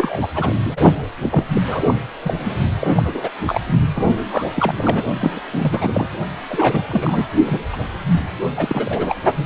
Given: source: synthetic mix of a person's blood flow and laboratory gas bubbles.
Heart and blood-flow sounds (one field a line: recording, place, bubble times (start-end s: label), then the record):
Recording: Doppler ultrasound of blood flow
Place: precordium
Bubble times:
0.00-0.28 s: bubbles
0.34-0.81 s: bubbles
1.22-1.44 s: bubbles
1.54-1.61 s: bubbles
1.67-1.83 s: bubbles
1.87-1.94 s: bubbles
2.24-2.33 s: bubbles
2.39-2.56 s: bubbles
2.80-3.29 s: bubbles
3.45-3.61 s: bubbles
3.94-4.09 s: bubbles
4.30-4.44 s: bubbles
4.55-4.75 s: bubbles
4.78-5.04 s: bubbles
5.21-5.40 s: bubbles
5.52-6.07 s: bubbles
6.50-6.82 s: bubbles
6.90-7.25 s: bubbles
7.46-7.61 s: bubbles
7.72-7.76 s: bubbles
8.56-9.16 s: bubbles
9.36-9.45 s: bubbles
From the record:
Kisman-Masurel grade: 332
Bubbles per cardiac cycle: rolling drumbeat, 9 or more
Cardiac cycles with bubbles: 50 to 99%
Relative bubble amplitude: moderate (0.250 to 0.450)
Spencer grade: 3 (all of the cardiac periods contain showers or single bubble signals, but not dominating or overriding the cardiac motion signals)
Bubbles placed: only in the low amplitude regions of the cardiac cycle